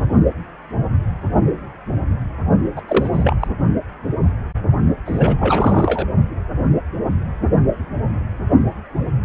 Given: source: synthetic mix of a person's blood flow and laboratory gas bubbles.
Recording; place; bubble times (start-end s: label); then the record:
Doppler ultrasound of blood flow; precordium
2.76-2.81 s: bubbles
2.88-3.09 s: bubbles
3.14-3.37 s: bubbles
3.40-3.48 s: bubbles
5.05-6.07 s: bubbles
From the record:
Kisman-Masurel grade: 232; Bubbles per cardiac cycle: several, 3 to 8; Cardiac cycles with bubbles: 50 to 99%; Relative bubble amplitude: moderate (0.250 to 0.450); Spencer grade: 3 (all of the cardiac periods contain showers or single bubble signals, but not dominating or overriding the cardiac motion signals); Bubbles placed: only in the low amplitude regions of the cardiac cycle